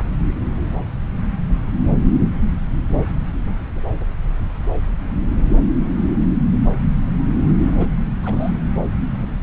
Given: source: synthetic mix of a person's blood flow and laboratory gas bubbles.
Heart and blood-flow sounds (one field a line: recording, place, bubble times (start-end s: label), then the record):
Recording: Doppler ultrasound of blood flow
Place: subclavian vein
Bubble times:
7.61-7.88 s: bubbles
8.22-8.60 s: bubbles
From the record:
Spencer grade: 2 (many but less than half of the cardiac periods contain bubble signals, singularly or in groups)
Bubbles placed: anywhere in the cardiac cycle